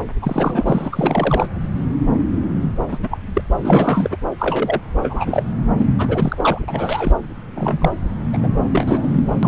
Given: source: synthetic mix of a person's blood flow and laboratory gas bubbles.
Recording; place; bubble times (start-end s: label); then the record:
Doppler ultrasound of blood flow; subclavian vein
0.22-1.48 s: bubbles
2.91-2.98 s: bubbles
3.03-3.18 s: bubbles
3.34-3.42 s: bubbles
3.58-4.17 s: bubbles
4.38-4.80 s: bubbles
5.03-5.42 s: bubbles
5.79-5.88 s: bubbles
5.98-7.15 s: bubbles
7.36-7.91 s: bubbles
8.32-8.49 s: bubbles
8.51-9.48 s: bubbles
From the record:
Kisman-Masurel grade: 233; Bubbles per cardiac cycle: several, 3 to 8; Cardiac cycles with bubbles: 50 to 99%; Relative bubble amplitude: loud (0.450 to 0.775); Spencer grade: 3 (all of the cardiac periods contain showers or single bubble signals, but not dominating or overriding the cardiac motion signals); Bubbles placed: anywhere in the cardiac cycle